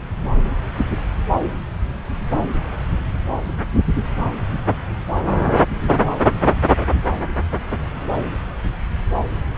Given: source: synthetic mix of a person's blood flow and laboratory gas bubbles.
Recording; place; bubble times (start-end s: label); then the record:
Doppler ultrasound of blood flow; subclavian vein
3.84-3.98 s: bubbles
From the record:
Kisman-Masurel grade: 111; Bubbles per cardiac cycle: 1 to 2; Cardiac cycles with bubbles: 1 to 10%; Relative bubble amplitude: barely perceptible (0.100 to 0.250); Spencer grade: 1 (occasional bubble signal discernible with the cardiac motion signal, with majority of cardiac periods free of bubbles); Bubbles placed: anywhere in the cardiac cycle